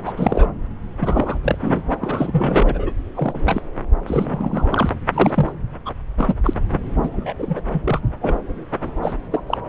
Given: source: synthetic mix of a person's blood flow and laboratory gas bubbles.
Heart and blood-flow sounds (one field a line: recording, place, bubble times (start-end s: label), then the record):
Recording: Doppler ultrasound of blood flow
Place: subclavian vein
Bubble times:
0.05-0.13 s: bubbles
0.16-0.53 s: bubbles
1.00-1.38 s: bubbles
1.43-1.82 s: bubbles
2.00-2.92 s: bubbles
3.15-3.34 s: bubbles
3.46-3.61 s: bubbles
4.06-4.89 s: bubbles
5.12-5.53 s: bubbles
5.85-5.93 s: bubbles
6.17-6.34 s: bubbles
6.44-6.54 s: bubbles
6.69-6.81 s: bubbles
7.03-7.09 s: bubbles
7.12-7.33 s: bubbles
7.38-7.60 s: bubbles
7.72-8.00 s: bubbles
8.21-8.35 s: bubbles
8.82-8.91 s: bubbles
9.03-9.14 s: bubbles
9.31-9.44 s: bubbles
9.46-9.57 s: bubbles
From the record:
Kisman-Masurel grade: 242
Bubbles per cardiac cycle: several, 3 to 8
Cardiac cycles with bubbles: 100%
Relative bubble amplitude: moderate (0.250 to 0.450)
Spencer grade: 3 (all of the cardiac periods contain showers or single bubble signals, but not dominating or overriding the cardiac motion signals)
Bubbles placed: anywhere in the cardiac cycle